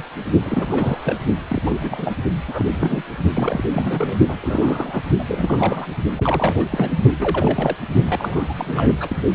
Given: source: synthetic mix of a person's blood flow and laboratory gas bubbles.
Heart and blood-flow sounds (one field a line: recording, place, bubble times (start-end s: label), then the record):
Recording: Doppler ultrasound of blood flow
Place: precordium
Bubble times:
0.00-0.04 s: bubbles
0.43-1.18 s: bubbles
1.48-2.13 s: bubbles
2.47-3.04 s: bubbles
3.33-3.69 s: bubbles
3.72-4.19 s: bubbles
4.28-5.04 s: bubbles
5.19-5.24 s: bubbles
5.28-5.88 s: bubbles
6.16-6.67 s: bubbles
6.71-7.00 s: bubbles
7.19-7.77 s: bubbles
8.04-8.92 s: bubbles
9.00-9.23 s: bubbles
From the record:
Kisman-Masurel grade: 342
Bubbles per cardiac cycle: rolling drumbeat, 9 or more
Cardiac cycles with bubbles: 100%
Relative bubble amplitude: moderate (0.250 to 0.450)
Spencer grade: 3 (all of the cardiac periods contain showers or single bubble signals, but not dominating or overriding the cardiac motion signals)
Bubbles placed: only in the low amplitude regions of the cardiac cycle